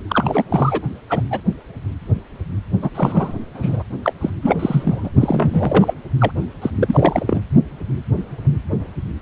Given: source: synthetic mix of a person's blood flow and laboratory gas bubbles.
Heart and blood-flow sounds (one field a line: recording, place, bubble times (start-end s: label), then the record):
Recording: Doppler ultrasound of blood flow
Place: precordium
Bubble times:
0.08-0.44 s: bubbles
0.49-0.81 s: bubbles
1.09-1.22 s: bubbles
1.30-1.41 s: bubbles
2.82-2.90 s: bubbles
2.95-3.36 s: bubbles
3.54-3.83 s: bubbles
4.04-4.13 s: bubbles
4.21-4.30 s: bubbles
4.42-5.10 s: bubbles
5.20-5.94 s: bubbles
6.19-6.31 s: bubbles
6.62-6.71 s: bubbles
6.76-7.41 s: bubbles
From the record:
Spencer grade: 3 (all of the cardiac periods contain showers or single bubble signals, but not dominating or overriding the cardiac motion signals)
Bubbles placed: only in the low amplitude regions of the cardiac cycle